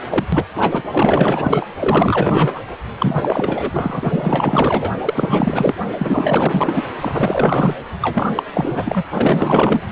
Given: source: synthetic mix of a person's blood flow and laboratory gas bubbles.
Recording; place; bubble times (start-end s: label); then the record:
Doppler ultrasound of blood flow; precordium
0.00-0.02 s: bubbles
0.09-0.26 s: bubbles
0.32-0.45 s: bubbles
0.56-0.82 s: bubbles
0.93-1.67 s: bubbles
1.79-2.61 s: bubbles
2.98-4.91 s: bubbles
5.04-5.75 s: bubbles
5.98-6.85 s: bubbles
7.00-7.75 s: bubbles
8.01-8.31 s: bubbles
8.36-8.43 s: bubbles
8.53-9.03 s: bubbles
9.13-9.81 s: bubbles
From the record:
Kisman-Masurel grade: 444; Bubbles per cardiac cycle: continuous sound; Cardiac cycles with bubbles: 100%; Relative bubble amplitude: maximal (0.775 to 0.999); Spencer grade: 4 (maximum detectable bubble signal sounding continuously throughout systole and diastole of every cardiac period, and overriding the amplitude of the normal cardiac signals); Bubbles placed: anywhere in the cardiac cycle